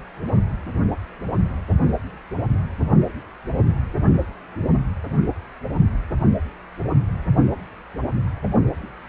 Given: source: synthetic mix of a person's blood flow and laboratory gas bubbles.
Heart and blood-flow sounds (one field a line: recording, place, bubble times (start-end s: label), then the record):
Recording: Doppler ultrasound of blood flow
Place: precordium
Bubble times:
0.33-0.40 s: bubbles
From the record:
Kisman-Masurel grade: 111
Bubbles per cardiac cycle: 1 to 2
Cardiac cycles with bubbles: 1 to 10%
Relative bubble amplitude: barely perceptible (0.100 to 0.250)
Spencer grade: 1 (occasional bubble signal discernible with the cardiac motion signal, with majority of cardiac periods free of bubbles)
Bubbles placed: anywhere in the cardiac cycle